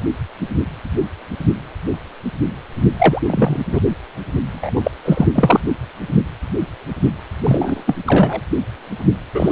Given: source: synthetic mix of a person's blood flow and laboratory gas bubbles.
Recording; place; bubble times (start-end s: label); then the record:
Doppler ultrasound of blood flow; precordium
2.98-3.21 s: bubbles
3.27-3.62 s: bubbles
3.72-3.80 s: bubbles
4.52-4.91 s: bubbles
5.04-5.28 s: bubbles
5.35-5.60 s: bubbles
7.43-7.83 s: bubbles
7.87-7.96 s: bubbles
8.06-8.41 s: bubbles
9.34-9.51 s: bubbles
From the record:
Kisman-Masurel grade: 223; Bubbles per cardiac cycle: several, 3 to 8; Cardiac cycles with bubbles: 10 to 50%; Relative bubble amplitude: loud (0.450 to 0.775); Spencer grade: 2 (many but less than half of the cardiac periods contain bubble signals, singularly or in groups); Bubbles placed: anywhere in the cardiac cycle